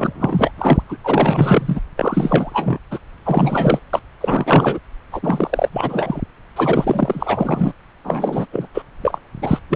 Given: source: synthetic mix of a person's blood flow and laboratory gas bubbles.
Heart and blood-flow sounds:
Doppler ultrasound of blood flow; subclavian vein
0.00-0.51 s: bubbles
0.57-0.82 s: bubbles
0.88-0.96 s: bubbles
1.04-1.80 s: bubbles
1.96-2.79 s: bubbles
2.91-2.99 s: bubbles
3.25-3.79 s: bubbles
3.93-4.01 s: bubbles
4.21-4.78 s: bubbles
5.12-5.68 s: bubbles
5.72-6.21 s: bubbles
6.56-7.73 s: bubbles
8.04-8.46 s: bubbles
8.52-8.67 s: bubbles
8.74-8.82 s: bubbles
9.01-9.20 s: bubbles
9.41-9.59 s: bubbles
9.70-9.76 s: bubbles
From the record:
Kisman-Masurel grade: 444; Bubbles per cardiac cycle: continuous sound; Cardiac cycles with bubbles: 100%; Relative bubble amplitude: maximal (0.775 to 0.999); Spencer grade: 4 (maximum detectable bubble signal sounding continuously throughout systole and diastole of every cardiac period, and overriding the amplitude of the normal cardiac signals); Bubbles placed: anywhere in the cardiac cycle

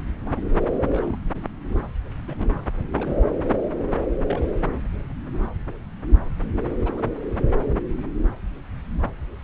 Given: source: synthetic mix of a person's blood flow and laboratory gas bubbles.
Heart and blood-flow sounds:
Doppler ultrasound of blood flow; subclavian vein
0.56-0.62 s: bubbles
0.81-1.17 s: bubbles
2.27-2.35 s: bubbles
2.38-2.62 s: bubbles
2.96-3.15 s: bubbles
4.26-4.48 s: bubbles
6.80-6.93 s: bubbles
6.96-7.04 s: bubbles
From the record:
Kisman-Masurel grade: 221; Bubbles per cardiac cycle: several, 3 to 8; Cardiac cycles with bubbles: 10 to 50%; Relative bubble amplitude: barely perceptible (0.100 to 0.250); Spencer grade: 2 (many but less than half of the cardiac periods contain bubble signals, singularly or in groups); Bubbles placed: anywhere in the cardiac cycle

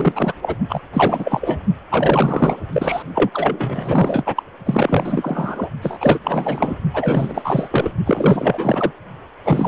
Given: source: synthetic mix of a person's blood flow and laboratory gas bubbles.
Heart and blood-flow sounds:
Doppler ultrasound of blood flow; precordium
0.00-0.32 s: bubbles
0.42-0.55 s: bubbles
0.69-0.81 s: bubbles
0.93-1.58 s: bubbles
1.90-2.56 s: bubbles
2.73-3.02 s: bubbles
3.14-3.30 s: bubbles
3.33-4.43 s: bubbles
4.64-5.69 s: bubbles
5.81-6.18 s: bubbles
6.23-6.78 s: bubbles
6.93-7.93 s: bubbles
8.06-8.91 s: bubbles
9.44-9.68 s: bubbles
From the record:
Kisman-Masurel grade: 444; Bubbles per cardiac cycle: continuous sound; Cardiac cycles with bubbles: 100%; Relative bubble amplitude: maximal (0.775 to 0.999); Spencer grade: 4 (maximum detectable bubble signal sounding continuously throughout systole and diastole of every cardiac period, and overriding the amplitude of the normal cardiac signals); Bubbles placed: only in the low amplitude regions of the cardiac cycle

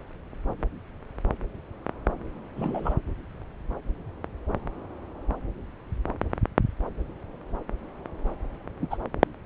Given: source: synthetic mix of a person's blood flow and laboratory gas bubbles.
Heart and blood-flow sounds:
Doppler ultrasound of blood flow; subclavian vein
2.56-2.94 s: bubbles
8.80-8.97 s: bubbles
From the record:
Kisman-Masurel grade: 111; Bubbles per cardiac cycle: 1 to 2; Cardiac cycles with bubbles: 1 to 10%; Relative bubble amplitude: barely perceptible (0.100 to 0.250); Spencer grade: 1 (occasional bubble signal discernible with the cardiac motion signal, with majority of cardiac periods free of bubbles); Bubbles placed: anywhere in the cardiac cycle

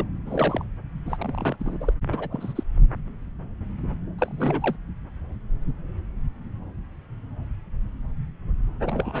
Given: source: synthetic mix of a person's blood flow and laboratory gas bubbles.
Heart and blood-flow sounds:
Doppler ultrasound of blood flow; subclavian vein
0.00-0.04 s: bubbles
0.26-0.64 s: bubbles
1.06-1.56 s: bubbles
1.60-1.78 s: bubbles
1.80-1.93 s: bubbles
2.13-2.63 s: bubbles
4.19-4.76 s: bubbles
8.83-9.20 s: bubbles
From the record:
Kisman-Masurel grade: 221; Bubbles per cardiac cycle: several, 3 to 8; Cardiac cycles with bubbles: 10 to 50%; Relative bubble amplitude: barely perceptible (0.100 to 0.250); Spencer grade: 2 (many but less than half of the cardiac periods contain bubble signals, singularly or in groups); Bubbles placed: anywhere in the cardiac cycle

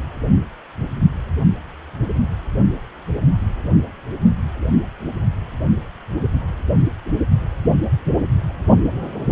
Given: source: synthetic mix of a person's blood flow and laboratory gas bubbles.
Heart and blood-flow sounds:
Doppler ultrasound of blood flow; precordium
no bubbles
From the record:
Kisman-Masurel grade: 000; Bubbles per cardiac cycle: 0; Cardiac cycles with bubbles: 0%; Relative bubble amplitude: no bubbles discernible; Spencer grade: 0 (complete lack of bubble signals)

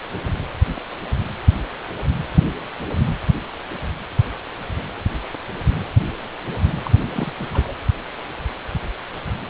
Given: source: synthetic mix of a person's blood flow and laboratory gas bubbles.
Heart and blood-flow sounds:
Doppler ultrasound of blood flow; precordium
6.84-6.91 s: bubbles
7.02-7.33 s: bubbles
7.38-7.46 s: bubbles
7.53-7.75 s: bubbles
From the record:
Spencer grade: 1 (occasional bubble signal discernible with the cardiac motion signal, with majority of cardiac periods free of bubbles); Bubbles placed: anywhere in the cardiac cycle

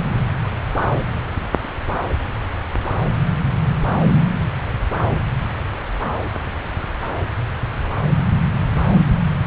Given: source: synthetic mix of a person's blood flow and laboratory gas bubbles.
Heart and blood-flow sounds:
Doppler ultrasound of blood flow; subclavian vein
no bubbles
From the record:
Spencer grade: 0 (complete lack of bubble signals)

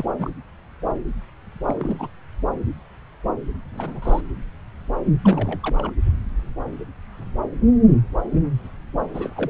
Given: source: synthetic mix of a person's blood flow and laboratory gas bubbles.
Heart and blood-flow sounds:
Doppler ultrasound of blood flow; subclavian vein
0.00-0.04 s: bubbles
0.18-0.30 s: bubbles
1.67-2.09 s: bubbles
3.73-4.21 s: bubbles
5.23-5.58 s: bubbles
5.63-5.92 s: bubbles
9.13-9.50 s: bubbles
From the record:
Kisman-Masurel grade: 221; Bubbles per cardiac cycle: several, 3 to 8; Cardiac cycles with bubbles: 10 to 50%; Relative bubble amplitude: barely perceptible (0.100 to 0.250); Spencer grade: 2 (many but less than half of the cardiac periods contain bubble signals, singularly or in groups); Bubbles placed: anywhere in the cardiac cycle

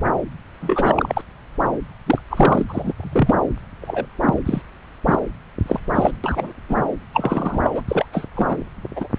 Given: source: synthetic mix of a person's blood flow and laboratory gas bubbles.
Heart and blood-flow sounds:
Doppler ultrasound of blood flow; subclavian vein
0.61-1.13 s: bubbles
1.17-1.21 s: bubbles
2.06-2.22 s: bubbles
2.29-2.65 s: bubbles
2.69-2.93 s: bubbles
2.98-3.36 s: bubbles
3.81-4.06 s: bubbles
4.23-4.35 s: bubbles
4.45-4.62 s: bubbles
5.06-5.19 s: bubbles
5.66-5.80 s: bubbles
5.94-6.11 s: bubbles
6.24-6.52 s: bubbles
6.69-6.77 s: bubbles
7.14-7.61 s: bubbles
7.63-7.71 s: bubbles
7.74-7.82 s: bubbles
7.88-8.05 s: bubbles
8.12-8.26 s: bubbles
8.35-8.56 s: bubbles
8.96-9.08 s: bubbles
From the record:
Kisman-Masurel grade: 243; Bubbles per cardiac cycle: several, 3 to 8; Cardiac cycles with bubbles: 100%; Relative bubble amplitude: loud (0.450 to 0.775); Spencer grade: 3 (all of the cardiac periods contain showers or single bubble signals, but not dominating or overriding the cardiac motion signals); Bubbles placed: anywhere in the cardiac cycle

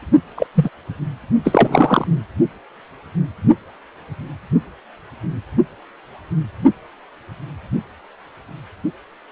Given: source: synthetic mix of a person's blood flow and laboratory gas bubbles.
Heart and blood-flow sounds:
Doppler ultrasound of blood flow; precordium
0.36-0.46 s: bubbles
0.54-0.69 s: bubbles
1.45-2.08 s: bubbles
From the record:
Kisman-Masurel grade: 223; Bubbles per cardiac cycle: several, 3 to 8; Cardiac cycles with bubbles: 10 to 50%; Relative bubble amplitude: loud (0.450 to 0.775); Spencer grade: 2 (many but less than half of the cardiac periods contain bubble signals, singularly or in groups); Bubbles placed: only in the low amplitude regions of the cardiac cycle

